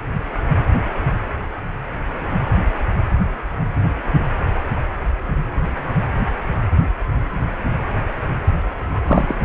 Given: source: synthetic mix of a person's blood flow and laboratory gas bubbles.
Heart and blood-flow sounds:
Doppler ultrasound of blood flow; precordium
9.05-9.35 s: bubbles
From the record:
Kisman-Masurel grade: 113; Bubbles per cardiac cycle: 1 to 2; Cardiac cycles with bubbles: 1 to 10%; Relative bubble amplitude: loud (0.450 to 0.775); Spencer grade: 1 (occasional bubble signal discernible with the cardiac motion signal, with majority of cardiac periods free of bubbles); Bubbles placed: anywhere in the cardiac cycle

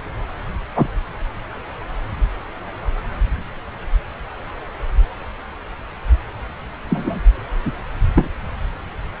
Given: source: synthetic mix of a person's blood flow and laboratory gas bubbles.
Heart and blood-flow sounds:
Doppler ultrasound of blood flow; subclavian vein
0.75-0.88 s: bubbles
6.90-7.21 s: bubbles
7.65-7.72 s: bubbles
8.15-8.30 s: bubbles
From the record:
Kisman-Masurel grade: 123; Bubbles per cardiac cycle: 1 to 2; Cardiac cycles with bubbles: 10 to 50%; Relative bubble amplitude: loud (0.450 to 0.775); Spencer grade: 2 (many but less than half of the cardiac periods contain bubble signals, singularly or in groups); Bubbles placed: anywhere in the cardiac cycle

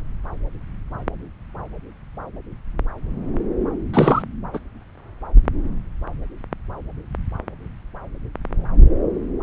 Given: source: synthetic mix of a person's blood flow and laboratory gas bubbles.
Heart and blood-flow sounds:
Doppler ultrasound of blood flow; subclavian vein
3.93-4.22 s: bubbles
4.53-4.59 s: bubbles
From the record:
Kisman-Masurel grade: 212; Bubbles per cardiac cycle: several, 3 to 8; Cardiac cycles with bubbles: 1 to 10%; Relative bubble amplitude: moderate (0.250 to 0.450); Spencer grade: 1 (occasional bubble signal discernible with the cardiac motion signal, with majority of cardiac periods free of bubbles); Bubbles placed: anywhere in the cardiac cycle

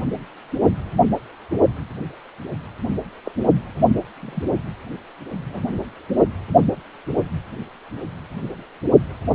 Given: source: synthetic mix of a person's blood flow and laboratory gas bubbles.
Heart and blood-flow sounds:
Doppler ultrasound of blood flow; precordium
3.25-3.31 s: bubbles
4.16-4.42 s: bubbles
5.46-5.61 s: bubbles
From the record:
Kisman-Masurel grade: 121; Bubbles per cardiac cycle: 1 to 2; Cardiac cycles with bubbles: 10 to 50%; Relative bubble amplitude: barely perceptible (0.100 to 0.250); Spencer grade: 2 (many but less than half of the cardiac periods contain bubble signals, singularly or in groups); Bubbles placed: only in the low amplitude regions of the cardiac cycle

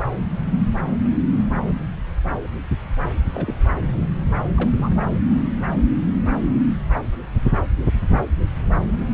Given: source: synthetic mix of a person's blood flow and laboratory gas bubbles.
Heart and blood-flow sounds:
Doppler ultrasound of blood flow; subclavian vein
3.34-3.54 s: bubbles
3.63-3.75 s: bubbles
4.56-4.70 s: bubbles
4.76-5.04 s: bubbles
From the record:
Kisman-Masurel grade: 221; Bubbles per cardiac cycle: several, 3 to 8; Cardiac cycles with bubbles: 10 to 50%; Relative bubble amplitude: barely perceptible (0.100 to 0.250); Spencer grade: 2 (many but less than half of the cardiac periods contain bubble signals, singularly or in groups); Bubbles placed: anywhere in the cardiac cycle

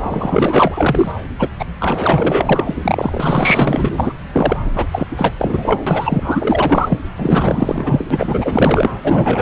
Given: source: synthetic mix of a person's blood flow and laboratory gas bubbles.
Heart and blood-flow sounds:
Doppler ultrasound of blood flow; subclavian vein
0.03-1.11 s: bubbles
1.39-1.48 s: bubbles
1.59-1.65 s: bubbles
1.80-2.77 s: bubbles
2.85-4.17 s: bubbles
4.33-4.57 s: bubbles
4.75-4.86 s: bubbles
4.91-5.06 s: bubbles
5.16-5.31 s: bubbles
5.38-7.00 s: bubbles
7.17-8.07 s: bubbles
8.10-8.91 s: bubbles
9.04-9.42 s: bubbles
From the record:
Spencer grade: 4 (maximum detectable bubble signal sounding continuously throughout systole and diastole of every cardiac period, and overriding the amplitude of the normal cardiac signals); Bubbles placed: anywhere in the cardiac cycle

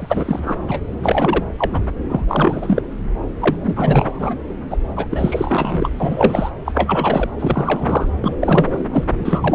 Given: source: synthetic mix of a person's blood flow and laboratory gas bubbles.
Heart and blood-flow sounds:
Doppler ultrasound of blood flow; subclavian vein
0.00-0.55 s: bubbles
0.67-0.80 s: bubbles
1.02-1.43 s: bubbles
1.58-1.81 s: bubbles
2.08-2.25 s: bubbles
2.28-2.82 s: bubbles
3.40-4.36 s: bubbles
4.70-4.77 s: bubbles
4.96-5.08 s: bubbles
5.11-5.91 s: bubbles
6.00-6.51 s: bubbles
6.65-7.30 s: bubbles
7.39-8.11 s: bubbles
8.21-8.34 s: bubbles
8.41-8.67 s: bubbles
8.71-8.86 s: bubbles
8.93-9.04 s: bubbles
9.20-9.55 s: bubbles
From the record:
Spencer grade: 3 (all of the cardiac periods contain showers or single bubble signals, but not dominating or overriding the cardiac motion signals); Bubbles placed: anywhere in the cardiac cycle

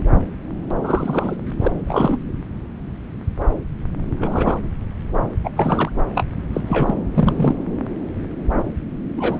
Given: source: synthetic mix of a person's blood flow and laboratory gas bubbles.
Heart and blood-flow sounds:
Doppler ultrasound of blood flow; subclavian vein
0.83-1.35 s: bubbles
1.58-1.72 s: bubbles
1.86-2.19 s: bubbles
4.17-4.59 s: bubbles
5.44-5.51 s: bubbles
5.56-5.90 s: bubbles
6.14-6.26 s: bubbles
6.53-6.61 s: bubbles
6.67-6.94 s: bubbles
7.14-7.55 s: bubbles
9.16-9.40 s: bubbles
From the record:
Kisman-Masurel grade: 223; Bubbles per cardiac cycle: several, 3 to 8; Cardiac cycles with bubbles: 10 to 50%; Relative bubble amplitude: loud (0.450 to 0.775); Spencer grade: 2 (many but less than half of the cardiac periods contain bubble signals, singularly or in groups); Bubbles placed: anywhere in the cardiac cycle

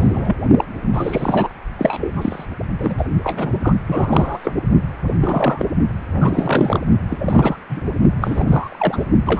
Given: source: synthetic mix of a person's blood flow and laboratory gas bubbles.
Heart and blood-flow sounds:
Doppler ultrasound of blood flow; precordium
0.00-0.36 s: bubbles
0.57-0.64 s: bubbles
0.92-1.49 s: bubbles
1.78-2.46 s: bubbles
2.79-2.94 s: bubbles
2.98-3.05 s: bubbles
3.23-3.74 s: bubbles
3.87-4.54 s: bubbles
5.08-5.14 s: bubbles
5.20-5.65 s: bubbles
6.21-6.79 s: bubbles
7.10-7.56 s: bubbles
7.69-7.84 s: bubbles
8.21-9.04 s: bubbles
9.26-9.40 s: bubbles
From the record:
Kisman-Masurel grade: 333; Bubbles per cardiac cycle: rolling drumbeat, 9 or more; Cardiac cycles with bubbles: 50 to 99%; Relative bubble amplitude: loud (0.450 to 0.775); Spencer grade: 3 (all of the cardiac periods contain showers or single bubble signals, but not dominating or overriding the cardiac motion signals); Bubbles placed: only in the low amplitude regions of the cardiac cycle

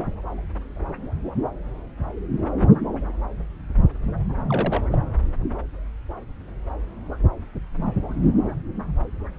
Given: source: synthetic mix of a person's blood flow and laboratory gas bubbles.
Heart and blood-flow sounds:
Doppler ultrasound of blood flow; subclavian vein
4.47-4.83 s: bubbles
4.92-5.01 s: bubbles
From the record:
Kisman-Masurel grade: 211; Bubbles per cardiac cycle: several, 3 to 8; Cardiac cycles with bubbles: 1 to 10%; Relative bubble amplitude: barely perceptible (0.100 to 0.250); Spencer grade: 1 (occasional bubble signal discernible with the cardiac motion signal, with majority of cardiac periods free of bubbles); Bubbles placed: anywhere in the cardiac cycle

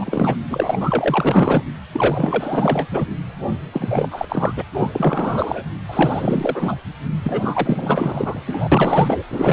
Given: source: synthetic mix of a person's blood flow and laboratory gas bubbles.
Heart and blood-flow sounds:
Doppler ultrasound of blood flow; precordium
0.00-0.37 s: bubbles
0.50-1.62 s: bubbles
1.93-2.87 s: bubbles
2.90-3.06 s: bubbles
3.72-4.25 s: bubbles
4.29-4.63 s: bubbles
4.74-5.64 s: bubbles
5.89-6.76 s: bubbles
7.24-8.42 s: bubbles
8.47-8.69 s: bubbles
8.72-9.24 s: bubbles
9.30-9.53 s: bubbles
From the record:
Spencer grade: 4 (maximum detectable bubble signal sounding continuously throughout systole and diastole of every cardiac period, and overriding the amplitude of the normal cardiac signals); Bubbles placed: anywhere in the cardiac cycle

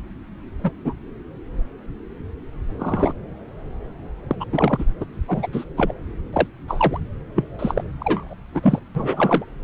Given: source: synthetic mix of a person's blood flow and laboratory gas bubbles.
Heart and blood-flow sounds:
Doppler ultrasound of blood flow; subclavian vein
0.64-0.70 s: bubbles
0.84-0.94 s: bubbles
2.79-3.13 s: bubbles
4.30-4.36 s: bubbles
4.40-4.45 s: bubbles
4.52-4.85 s: bubbles
5.00-5.05 s: bubbles
5.27-5.47 s: bubbles
5.52-5.64 s: bubbles
5.76-5.92 s: bubbles
6.33-6.47 s: bubbles
6.67-7.00 s: bubbles
7.35-7.44 s: bubbles
7.59-7.84 s: bubbles
7.99-8.35 s: bubbles
8.54-8.79 s: bubbles
8.95-9.45 s: bubbles
From the record:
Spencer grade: 3 (all of the cardiac periods contain showers or single bubble signals, but not dominating or overriding the cardiac motion signals); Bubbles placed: anywhere in the cardiac cycle

